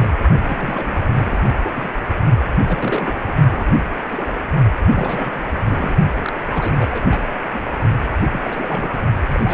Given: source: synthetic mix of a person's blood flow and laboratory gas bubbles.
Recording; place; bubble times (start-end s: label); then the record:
Doppler ultrasound of blood flow; precordium
0.00-0.12 s: bubbles
0.45-1.43 s: bubbles
1.64-1.72 s: bubbles
1.75-1.90 s: bubbles
2.48-2.52 s: bubbles
2.59-3.37 s: bubbles
3.51-3.71 s: bubbles
3.96-4.42 s: bubbles
4.95-5.52 s: bubbles
5.54-5.96 s: bubbles
6.19-6.33 s: bubbles
6.49-7.04 s: bubbles
7.10-7.24 s: bubbles
7.50-7.62 s: bubbles
8.25-8.39 s: bubbles
8.44-9.01 s: bubbles
9.28-9.54 s: bubbles
From the record:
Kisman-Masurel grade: 342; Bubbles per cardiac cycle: rolling drumbeat, 9 or more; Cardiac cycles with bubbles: 100%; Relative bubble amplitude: moderate (0.250 to 0.450); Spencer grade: 3 (all of the cardiac periods contain showers or single bubble signals, but not dominating or overriding the cardiac motion signals); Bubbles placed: only in the low amplitude regions of the cardiac cycle